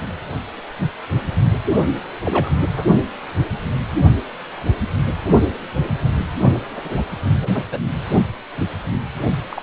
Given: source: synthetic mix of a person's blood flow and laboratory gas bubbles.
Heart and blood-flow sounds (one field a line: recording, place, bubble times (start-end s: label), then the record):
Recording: Doppler ultrasound of blood flow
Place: precordium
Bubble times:
2.25-2.55 s: bubbles
2.76-2.85 s: bubbles
6.75-7.04 s: bubbles
7.43-7.48 s: bubbles
7.54-7.63 s: bubbles
7.71-7.79 s: bubbles
9.50-9.62 s: bubbles
From the record:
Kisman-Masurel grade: 222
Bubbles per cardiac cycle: several, 3 to 8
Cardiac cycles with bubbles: 10 to 50%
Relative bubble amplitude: moderate (0.250 to 0.450)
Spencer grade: 2 (many but less than half of the cardiac periods contain bubble signals, singularly or in groups)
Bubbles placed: only in the low amplitude regions of the cardiac cycle